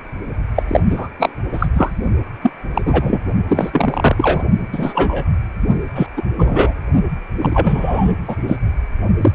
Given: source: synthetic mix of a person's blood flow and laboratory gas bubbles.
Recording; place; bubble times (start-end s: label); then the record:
Doppler ultrasound of blood flow; precordium
0.54-0.62 s: bubbles
0.68-0.80 s: bubbles
0.90-1.09 s: bubbles
1.20-1.29 s: bubbles
1.52-1.67 s: bubbles
1.74-1.91 s: bubbles
2.42-2.51 s: bubbles
2.74-2.82 s: bubbles
2.85-3.20 s: bubbles
3.49-4.44 s: bubbles
4.72-5.25 s: bubbles
5.95-6.07 s: bubbles
6.17-6.21 s: bubbles
6.38-6.74 s: bubbles
7.41-8.12 s: bubbles
8.27-8.35 s: bubbles
8.46-8.56 s: bubbles
9.21-9.31 s: bubbles
From the record:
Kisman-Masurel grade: 243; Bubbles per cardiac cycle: several, 3 to 8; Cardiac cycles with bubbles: 100%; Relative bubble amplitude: loud (0.450 to 0.775); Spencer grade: 3 (all of the cardiac periods contain showers or single bubble signals, but not dominating or overriding the cardiac motion signals); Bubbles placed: only in the low amplitude regions of the cardiac cycle